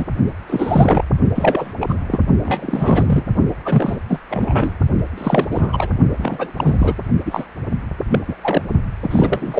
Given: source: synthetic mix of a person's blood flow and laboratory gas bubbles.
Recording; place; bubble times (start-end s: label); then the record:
Doppler ultrasound of blood flow; precordium
0.00-0.07 s: bubbles
0.47-1.04 s: bubbles
1.35-1.73 s: bubbles
1.80-1.86 s: bubbles
1.89-1.95 s: bubbles
2.07-2.20 s: bubbles
2.43-3.23 s: bubbles
3.65-3.98 s: bubbles
4.08-4.20 s: bubbles
4.29-4.73 s: bubbles
5.17-5.47 s: bubbles
5.50-5.92 s: bubbles
6.19-6.52 s: bubbles
6.56-6.94 s: bubbles
7.25-7.46 s: bubbles
7.71-7.78 s: bubbles
8.11-8.20 s: bubbles
8.28-8.35 s: bubbles
8.41-8.62 s: bubbles
9.01-9.60 s: bubbles
From the record:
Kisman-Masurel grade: 343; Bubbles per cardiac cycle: rolling drumbeat, 9 or more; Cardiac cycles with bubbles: 100%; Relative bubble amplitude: loud (0.450 to 0.775); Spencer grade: 3 (all of the cardiac periods contain showers or single bubble signals, but not dominating or overriding the cardiac motion signals); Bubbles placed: only in the low amplitude regions of the cardiac cycle